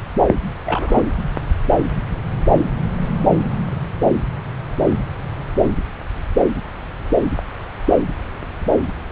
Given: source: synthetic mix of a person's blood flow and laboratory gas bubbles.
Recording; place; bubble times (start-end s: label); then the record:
Doppler ultrasound of blood flow; subclavian vein
0.66-1.02 s: bubbles
1.75-1.82 s: bubbles
From the record:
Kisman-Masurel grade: 122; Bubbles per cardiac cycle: 1 to 2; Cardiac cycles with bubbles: 10 to 50%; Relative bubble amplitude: moderate (0.250 to 0.450); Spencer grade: 2 (many but less than half of the cardiac periods contain bubble signals, singularly or in groups); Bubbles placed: anywhere in the cardiac cycle